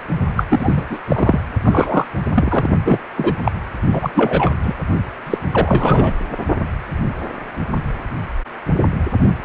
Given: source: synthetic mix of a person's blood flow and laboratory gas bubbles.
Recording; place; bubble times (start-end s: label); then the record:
Doppler ultrasound of blood flow; precordium
0.36-0.43 s: bubbles
0.49-0.74 s: bubbles
0.76-0.85 s: bubbles
0.89-0.99 s: bubbles
1.07-1.40 s: bubbles
1.63-2.05 s: bubbles
2.34-2.68 s: bubbles
2.84-2.98 s: bubbles
3.16-3.33 s: bubbles
3.44-3.51 s: bubbles
3.92-4.12 s: bubbles
4.15-4.51 s: bubbles
4.62-4.75 s: bubbles
5.26-5.38 s: bubbles
5.51-6.13 s: bubbles
From the record:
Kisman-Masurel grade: 233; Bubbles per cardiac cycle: several, 3 to 8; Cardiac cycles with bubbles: 50 to 99%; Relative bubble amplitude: loud (0.450 to 0.775); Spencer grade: 3 (all of the cardiac periods contain showers or single bubble signals, but not dominating or overriding the cardiac motion signals); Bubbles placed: only in the low amplitude regions of the cardiac cycle